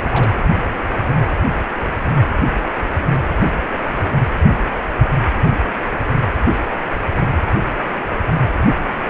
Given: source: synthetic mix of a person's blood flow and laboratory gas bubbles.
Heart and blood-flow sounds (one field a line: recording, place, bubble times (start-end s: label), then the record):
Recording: Doppler ultrasound of blood flow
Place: precordium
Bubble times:
0.09-0.33 s: bubbles
From the record:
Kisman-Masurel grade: 211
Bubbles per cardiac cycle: several, 3 to 8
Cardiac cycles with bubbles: 1 to 10%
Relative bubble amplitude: barely perceptible (0.100 to 0.250)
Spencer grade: 1 (occasional bubble signal discernible with the cardiac motion signal, with majority of cardiac periods free of bubbles)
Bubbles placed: anywhere in the cardiac cycle